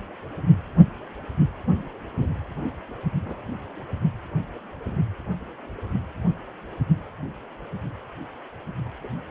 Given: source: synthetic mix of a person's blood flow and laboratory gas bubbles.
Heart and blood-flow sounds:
Doppler ultrasound of blood flow; precordium
2.21-2.28 s: bubbles
3.26-3.42 s: bubbles
9.04-9.08 s: bubbles
From the record:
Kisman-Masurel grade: 121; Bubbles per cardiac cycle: 1 to 2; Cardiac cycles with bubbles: 10 to 50%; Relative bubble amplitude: barely perceptible (0.100 to 0.250); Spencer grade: 2 (many but less than half of the cardiac periods contain bubble signals, singularly or in groups); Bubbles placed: only in the low amplitude regions of the cardiac cycle

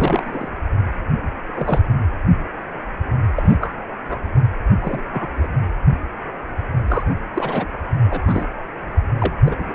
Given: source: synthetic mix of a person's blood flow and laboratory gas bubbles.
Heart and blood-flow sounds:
Doppler ultrasound of blood flow; precordium
0.00-0.49 s: bubbles
1.54-1.82 s: bubbles
3.36-3.57 s: bubbles
3.60-3.76 s: bubbles
4.08-4.19 s: bubbles
4.81-5.01 s: bubbles
5.11-5.29 s: bubbles
5.39-5.49 s: bubbles
6.88-7.04 s: bubbles
7.10-7.14 s: bubbles
7.34-7.66 s: bubbles
8.10-8.22 s: bubbles
8.24-8.46 s: bubbles
9.19-9.33 s: bubbles
9.45-9.75 s: bubbles
From the record:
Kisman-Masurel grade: 232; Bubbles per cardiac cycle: several, 3 to 8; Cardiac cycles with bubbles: 50 to 99%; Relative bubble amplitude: moderate (0.250 to 0.450); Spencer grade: 3 (all of the cardiac periods contain showers or single bubble signals, but not dominating or overriding the cardiac motion signals); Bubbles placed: anywhere in the cardiac cycle

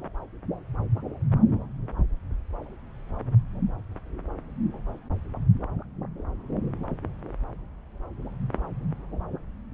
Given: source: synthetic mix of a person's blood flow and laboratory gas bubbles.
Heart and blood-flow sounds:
Doppler ultrasound of blood flow; subclavian vein
no bubbles
From the record:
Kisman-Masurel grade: 000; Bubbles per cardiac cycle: 0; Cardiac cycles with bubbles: 0%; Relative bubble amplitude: no bubbles discernible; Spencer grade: 0 (complete lack of bubble signals)

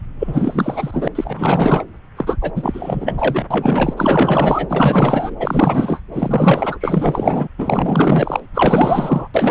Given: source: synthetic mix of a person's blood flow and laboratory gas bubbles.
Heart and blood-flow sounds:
Doppler ultrasound of blood flow; subclavian vein
0.19-1.08 s: bubbles
1.15-1.84 s: bubbles
2.17-2.37 s: bubbles
2.42-2.53 s: bubbles
2.56-3.46 s: bubbles
3.50-3.94 s: bubbles
3.97-5.35 s: bubbles
5.39-6.00 s: bubbles
6.12-7.48 s: bubbles
7.58-8.40 s: bubbles
8.54-9.28 s: bubbles
9.34-9.51 s: bubbles
From the record:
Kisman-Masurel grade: 444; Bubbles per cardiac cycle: continuous sound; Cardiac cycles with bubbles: 100%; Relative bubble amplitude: maximal (0.775 to 0.999); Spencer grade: 4 (maximum detectable bubble signal sounding continuously throughout systole and diastole of every cardiac period, and overriding the amplitude of the normal cardiac signals); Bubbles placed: anywhere in the cardiac cycle

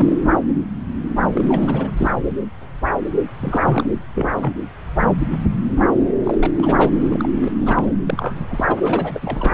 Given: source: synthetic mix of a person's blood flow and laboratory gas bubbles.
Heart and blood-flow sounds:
Doppler ultrasound of blood flow; subclavian vein
0.00-0.18 s: bubbles
1.33-1.91 s: bubbles
1.97-2.13 s: bubbles
3.39-3.90 s: bubbles
4.15-4.28 s: bubbles
4.36-4.53 s: bubbles
6.25-6.38 s: bubbles
6.40-6.50 s: bubbles
6.57-6.91 s: bubbles
7.10-7.28 s: bubbles
7.33-7.51 s: bubbles
7.58-7.94 s: bubbles
8.06-8.65 s: bubbles
8.67-8.75 s: bubbles
8.82-9.54 s: bubbles
From the record:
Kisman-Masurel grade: 332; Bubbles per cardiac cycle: rolling drumbeat, 9 or more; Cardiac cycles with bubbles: 50 to 99%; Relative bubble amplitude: moderate (0.250 to 0.450); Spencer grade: 3 (all of the cardiac periods contain showers or single bubble signals, but not dominating or overriding the cardiac motion signals); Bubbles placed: anywhere in the cardiac cycle

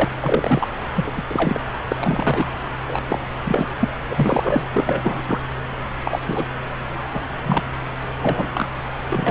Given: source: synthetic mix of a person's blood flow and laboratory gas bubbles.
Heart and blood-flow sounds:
Doppler ultrasound of blood flow; subclavian vein
0.00-0.05 s: bubbles
0.19-0.68 s: bubbles
0.97-1.12 s: bubbles
1.15-1.23 s: bubbles
1.29-1.60 s: bubbles
1.88-1.96 s: bubbles
1.98-2.47 s: bubbles
2.89-3.04 s: bubbles
3.09-3.19 s: bubbles
3.44-3.68 s: bubbles
3.79-3.88 s: bubbles
4.10-4.66 s: bubbles
4.72-5.22 s: bubbles
5.28-5.39 s: bubbles
6.04-6.19 s: bubbles
6.26-6.46 s: bubbles
7.13-7.20 s: bubbles
7.46-7.63 s: bubbles
8.19-8.48 s: bubbles
8.54-8.68 s: bubbles
9.10-9.30 s: bubbles
From the record:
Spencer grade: 3 (all of the cardiac periods contain showers or single bubble signals, but not dominating or overriding the cardiac motion signals); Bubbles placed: anywhere in the cardiac cycle

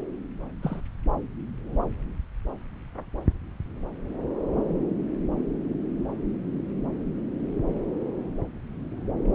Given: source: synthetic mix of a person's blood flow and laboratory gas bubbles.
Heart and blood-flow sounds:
Doppler ultrasound of blood flow; subclavian vein
0.62-0.80 s: bubbles
From the record:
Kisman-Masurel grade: 111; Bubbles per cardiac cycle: 1 to 2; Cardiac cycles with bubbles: 1 to 10%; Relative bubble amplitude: barely perceptible (0.100 to 0.250); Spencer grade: 1 (occasional bubble signal discernible with the cardiac motion signal, with majority of cardiac periods free of bubbles); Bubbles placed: anywhere in the cardiac cycle

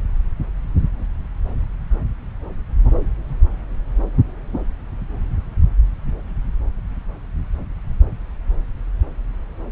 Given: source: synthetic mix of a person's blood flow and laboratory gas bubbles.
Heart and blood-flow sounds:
Doppler ultrasound of blood flow; subclavian vein
no bubbles
From the record:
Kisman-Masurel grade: 000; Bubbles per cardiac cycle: 0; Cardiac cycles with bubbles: 0%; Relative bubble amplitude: no bubbles discernible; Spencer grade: 0 (complete lack of bubble signals)

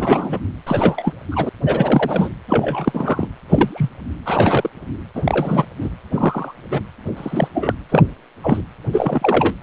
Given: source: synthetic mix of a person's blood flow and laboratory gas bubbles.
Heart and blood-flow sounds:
Doppler ultrasound of blood flow; precordium
0.00-0.40 s: bubbles
0.67-1.13 s: bubbles
1.31-1.49 s: bubbles
1.65-2.29 s: bubbles
2.48-3.28 s: bubbles
3.48-3.90 s: bubbles
4.26-4.70 s: bubbles
5.15-5.65 s: bubbles
5.80-5.89 s: bubbles
6.12-6.54 s: bubbles
6.62-6.82 s: bubbles
7.16-7.48 s: bubbles
7.54-7.74 s: bubbles
7.89-8.04 s: bubbles
8.43-8.62 s: bubbles
8.93-9.55 s: bubbles
From the record:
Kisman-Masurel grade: 243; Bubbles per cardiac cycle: several, 3 to 8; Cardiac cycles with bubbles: 100%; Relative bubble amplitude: loud (0.450 to 0.775); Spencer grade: 3 (all of the cardiac periods contain showers or single bubble signals, but not dominating or overriding the cardiac motion signals); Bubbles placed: anywhere in the cardiac cycle

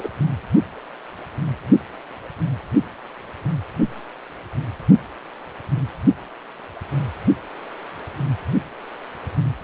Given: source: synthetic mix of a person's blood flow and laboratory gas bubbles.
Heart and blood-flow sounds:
Doppler ultrasound of blood flow; precordium
0.00-0.10 s: bubbles
From the record:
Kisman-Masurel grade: 212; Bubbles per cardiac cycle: several, 3 to 8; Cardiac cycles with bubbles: 1 to 10%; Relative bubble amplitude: moderate (0.250 to 0.450); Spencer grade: 1 (occasional bubble signal discernible with the cardiac motion signal, with majority of cardiac periods free of bubbles); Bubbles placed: anywhere in the cardiac cycle

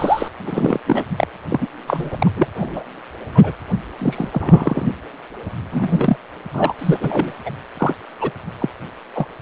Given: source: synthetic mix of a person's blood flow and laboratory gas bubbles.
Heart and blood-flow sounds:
Doppler ultrasound of blood flow; precordium
0.00-0.28 s: bubbles
0.46-0.80 s: bubbles
0.86-1.05 s: bubbles
1.17-1.26 s: bubbles
1.49-1.69 s: bubbles
1.87-2.31 s: bubbles
2.36-2.47 s: bubbles
2.55-2.83 s: bubbles
3.34-3.52 s: bubbles
3.98-4.29 s: bubbles
4.32-4.93 s: bubbles
5.72-6.17 s: bubbles
6.53-6.73 s: bubbles
6.79-6.97 s: bubbles
7.00-7.35 s: bubbles
7.46-7.51 s: bubbles
7.77-7.93 s: bubbles
8.21-8.31 s: bubbles
8.59-8.70 s: bubbles
9.14-9.27 s: bubbles
From the record:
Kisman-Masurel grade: 243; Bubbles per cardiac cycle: several, 3 to 8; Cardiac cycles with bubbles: 100%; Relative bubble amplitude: loud (0.450 to 0.775); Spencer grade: 3 (all of the cardiac periods contain showers or single bubble signals, but not dominating or overriding the cardiac motion signals); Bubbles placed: anywhere in the cardiac cycle

